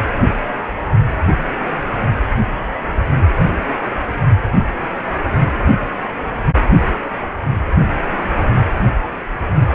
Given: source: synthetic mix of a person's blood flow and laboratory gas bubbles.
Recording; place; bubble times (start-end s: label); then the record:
Doppler ultrasound of blood flow; precordium
7.22-7.26 s: bubbles
7.46-7.56 s: bubbles
From the record:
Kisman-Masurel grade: 111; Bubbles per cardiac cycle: 1 to 2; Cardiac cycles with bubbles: 1 to 10%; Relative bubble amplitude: barely perceptible (0.100 to 0.250); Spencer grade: 1 (occasional bubble signal discernible with the cardiac motion signal, with majority of cardiac periods free of bubbles); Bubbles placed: only in the low amplitude regions of the cardiac cycle